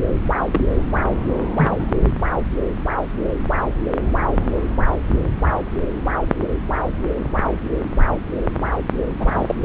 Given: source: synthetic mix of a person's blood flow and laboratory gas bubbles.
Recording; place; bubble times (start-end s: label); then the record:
Doppler ultrasound of blood flow; subclavian vein
0.53-0.66 s: bubbles
1.55-1.94 s: bubbles
9.20-9.55 s: bubbles
From the record:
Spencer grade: 2 (many but less than half of the cardiac periods contain bubble signals, singularly or in groups); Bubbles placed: anywhere in the cardiac cycle